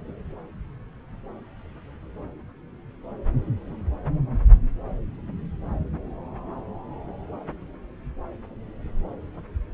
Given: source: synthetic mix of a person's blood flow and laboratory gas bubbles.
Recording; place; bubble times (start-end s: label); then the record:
Doppler ultrasound of blood flow; subclavian vein
no bubbles
From the record:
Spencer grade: 0 (complete lack of bubble signals)